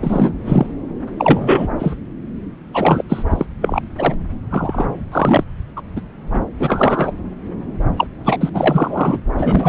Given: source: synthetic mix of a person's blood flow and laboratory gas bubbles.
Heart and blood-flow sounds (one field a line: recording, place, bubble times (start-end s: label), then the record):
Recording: Doppler ultrasound of blood flow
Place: subclavian vein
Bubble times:
0.01-0.32 s: bubbles
0.45-0.67 s: bubbles
1.19-1.67 s: bubbles
1.79-1.94 s: bubbles
2.73-3.02 s: bubbles
3.09-3.25 s: bubbles
3.29-3.46 s: bubbles
3.62-3.80 s: bubbles
3.98-4.14 s: bubbles
4.50-4.88 s: bubbles
5.12-5.44 s: bubbles
5.76-5.82 s: bubbles
5.96-6.01 s: bubbles
6.33-6.39 s: bubbles
6.58-7.12 s: bubbles
7.96-8.07 s: bubbles
8.24-8.49 s: bubbles
8.54-9.20 s: bubbles
9.38-9.68 s: bubbles
From the record:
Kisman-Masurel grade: 243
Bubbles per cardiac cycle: several, 3 to 8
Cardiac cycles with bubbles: 100%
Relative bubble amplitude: loud (0.450 to 0.775)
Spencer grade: 3 (all of the cardiac periods contain showers or single bubble signals, but not dominating or overriding the cardiac motion signals)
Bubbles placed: anywhere in the cardiac cycle